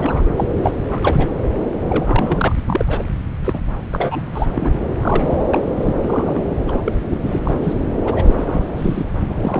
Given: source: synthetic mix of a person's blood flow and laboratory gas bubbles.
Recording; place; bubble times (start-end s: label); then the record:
Doppler ultrasound of blood flow; subclavian vein
0.00-0.22 s: bubbles
0.36-0.47 s: bubbles
0.56-0.73 s: bubbles
0.89-1.01 s: bubbles
1.03-1.29 s: bubbles
1.90-2.54 s: bubbles
2.67-3.04 s: bubbles
3.42-3.59 s: bubbles
3.91-4.21 s: bubbles
4.33-4.46 s: bubbles
4.52-4.78 s: bubbles
4.96-5.45 s: bubbles
5.50-5.65 s: bubbles
5.75-5.94 s: bubbles
6.02-6.40 s: bubbles
6.68-6.92 s: bubbles
7.11-7.18 s: bubbles
7.21-7.40 s: bubbles
7.45-7.54 s: bubbles
7.62-7.74 s: bubbles
8.04-8.66 s: bubbles
8.76-9.04 s: bubbles
9.28-9.60 s: bubbles
From the record:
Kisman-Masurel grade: 342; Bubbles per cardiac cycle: rolling drumbeat, 9 or more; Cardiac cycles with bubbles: 100%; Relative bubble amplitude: moderate (0.250 to 0.450); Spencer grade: 3 (all of the cardiac periods contain showers or single bubble signals, but not dominating or overriding the cardiac motion signals); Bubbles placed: anywhere in the cardiac cycle